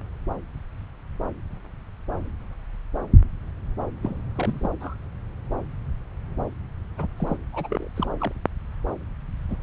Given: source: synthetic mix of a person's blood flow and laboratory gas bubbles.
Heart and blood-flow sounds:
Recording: Doppler ultrasound of blood flow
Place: subclavian vein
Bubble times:
4.03-4.21 s: bubbles
4.35-4.70 s: bubbles
4.80-4.96 s: bubbles
6.98-7.08 s: bubbles
7.17-7.37 s: bubbles
7.53-7.87 s: bubbles
7.95-8.08 s: bubbles
8.20-8.32 s: bubbles
9.49-9.57 s: bubbles
From the record:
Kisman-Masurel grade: 221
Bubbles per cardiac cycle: several, 3 to 8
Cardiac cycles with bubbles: 10 to 50%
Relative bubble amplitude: barely perceptible (0.100 to 0.250)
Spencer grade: 2 (many but less than half of the cardiac periods contain bubble signals, singularly or in groups)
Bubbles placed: anywhere in the cardiac cycle

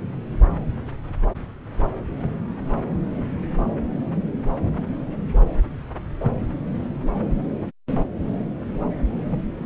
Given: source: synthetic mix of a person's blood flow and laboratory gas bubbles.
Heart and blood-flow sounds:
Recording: Doppler ultrasound of blood flow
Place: subclavian vein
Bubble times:
9.30-9.42 s: bubbles
From the record:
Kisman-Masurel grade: 121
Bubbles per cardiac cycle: 1 to 2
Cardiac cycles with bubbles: 10 to 50%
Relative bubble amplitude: barely perceptible (0.100 to 0.250)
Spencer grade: 2 (many but less than half of the cardiac periods contain bubble signals, singularly or in groups)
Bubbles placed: anywhere in the cardiac cycle

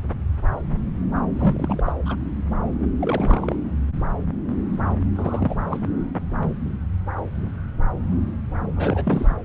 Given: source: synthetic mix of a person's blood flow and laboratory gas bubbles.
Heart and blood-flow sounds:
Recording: Doppler ultrasound of blood flow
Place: subclavian vein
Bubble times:
1.34-1.83 s: bubbles
1.86-1.92 s: bubbles
2.06-2.15 s: bubbles
3.00-3.56 s: bubbles
5.15-5.55 s: bubbles
5.70-5.86 s: bubbles
8.76-9.36 s: bubbles
From the record:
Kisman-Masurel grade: 221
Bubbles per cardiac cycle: several, 3 to 8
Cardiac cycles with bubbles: 10 to 50%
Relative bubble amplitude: barely perceptible (0.100 to 0.250)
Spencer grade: 2 (many but less than half of the cardiac periods contain bubble signals, singularly or in groups)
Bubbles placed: anywhere in the cardiac cycle

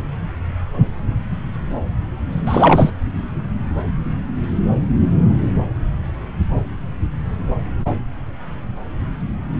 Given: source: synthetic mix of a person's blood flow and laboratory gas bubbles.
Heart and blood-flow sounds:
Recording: Doppler ultrasound of blood flow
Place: subclavian vein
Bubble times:
2.46-2.90 s: bubbles
From the record:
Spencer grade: 1 (occasional bubble signal discernible with the cardiac motion signal, with majority of cardiac periods free of bubbles)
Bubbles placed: anywhere in the cardiac cycle

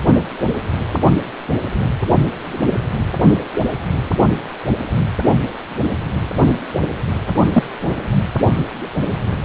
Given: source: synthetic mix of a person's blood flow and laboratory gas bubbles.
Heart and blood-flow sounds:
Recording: Doppler ultrasound of blood flow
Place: precordium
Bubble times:
3.67-3.73 s: bubbles
7.54-7.63 s: bubbles
7.91-7.99 s: bubbles
From the record:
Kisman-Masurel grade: 123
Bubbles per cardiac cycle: 1 to 2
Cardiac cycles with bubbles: 10 to 50%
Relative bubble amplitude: loud (0.450 to 0.775)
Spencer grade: 2 (many but less than half of the cardiac periods contain bubble signals, singularly or in groups)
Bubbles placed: anywhere in the cardiac cycle

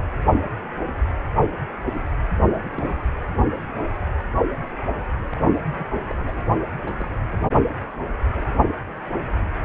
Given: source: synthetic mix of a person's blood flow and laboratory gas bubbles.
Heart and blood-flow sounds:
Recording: Doppler ultrasound of blood flow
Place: precordium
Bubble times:
2.49-2.61 s: bubbles
2.64-3.02 s: bubbles
5.33-5.41 s: bubbles
5.74-5.87 s: bubbles
5.92-6.00 s: bubbles
6.10-6.16 s: bubbles
6.18-6.41 s: bubbles
6.85-6.93 s: bubbles
6.96-7.12 s: bubbles
From the record:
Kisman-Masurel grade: 221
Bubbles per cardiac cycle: several, 3 to 8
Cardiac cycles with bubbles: 10 to 50%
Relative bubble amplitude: barely perceptible (0.100 to 0.250)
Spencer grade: 2 (many but less than half of the cardiac periods contain bubble signals, singularly or in groups)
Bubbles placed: anywhere in the cardiac cycle

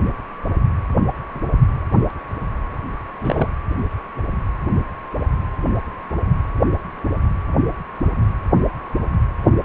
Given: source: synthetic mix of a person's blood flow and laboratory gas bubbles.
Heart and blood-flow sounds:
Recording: Doppler ultrasound of blood flow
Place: precordium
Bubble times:
3.19-3.50 s: bubbles
From the record:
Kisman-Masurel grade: 222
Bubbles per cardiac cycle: several, 3 to 8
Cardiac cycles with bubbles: 10 to 50%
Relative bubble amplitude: moderate (0.250 to 0.450)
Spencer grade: 2 (many but less than half of the cardiac periods contain bubble signals, singularly or in groups)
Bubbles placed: anywhere in the cardiac cycle

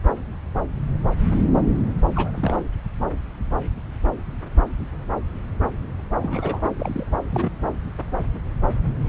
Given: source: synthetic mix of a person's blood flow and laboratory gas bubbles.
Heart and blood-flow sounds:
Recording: Doppler ultrasound of blood flow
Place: subclavian vein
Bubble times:
2.15-2.31 s: bubbles
2.36-2.57 s: bubbles
6.20-6.70 s: bubbles
6.78-7.06 s: bubbles
7.30-7.52 s: bubbles
From the record:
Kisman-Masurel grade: 221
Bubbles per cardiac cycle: several, 3 to 8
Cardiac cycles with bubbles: 10 to 50%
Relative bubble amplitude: barely perceptible (0.100 to 0.250)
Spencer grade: 2 (many but less than half of the cardiac periods contain bubble signals, singularly or in groups)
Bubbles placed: anywhere in the cardiac cycle

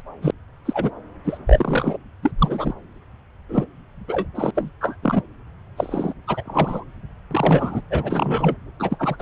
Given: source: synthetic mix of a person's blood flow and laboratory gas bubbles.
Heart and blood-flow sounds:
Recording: Doppler ultrasound of blood flow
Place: subclavian vein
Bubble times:
0.22-0.31 s: bubbles
0.65-0.91 s: bubbles
1.25-1.38 s: bubbles
1.46-1.97 s: bubbles
2.22-2.31 s: bubbles
2.38-2.74 s: bubbles
3.48-3.65 s: bubbles
4.08-4.28 s: bubbles
4.35-4.51 s: bubbles
4.56-4.71 s: bubbles
4.81-4.96 s: bubbles
5.03-5.22 s: bubbles
5.77-6.13 s: bubbles
6.27-6.85 s: bubbles
7.31-7.80 s: bubbles
7.91-8.56 s: bubbles
8.79-9.17 s: bubbles
9.19-9.22 s: bubbles
From the record:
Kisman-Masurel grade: 243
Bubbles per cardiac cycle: several, 3 to 8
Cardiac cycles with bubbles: 100%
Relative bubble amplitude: loud (0.450 to 0.775)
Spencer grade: 3 (all of the cardiac periods contain showers or single bubble signals, but not dominating or overriding the cardiac motion signals)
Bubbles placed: anywhere in the cardiac cycle

